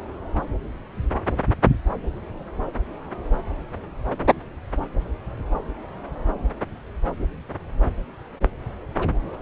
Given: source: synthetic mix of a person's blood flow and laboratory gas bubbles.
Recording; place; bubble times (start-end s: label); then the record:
Doppler ultrasound of blood flow; subclavian vein
no bubbles
From the record:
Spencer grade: 0 (complete lack of bubble signals)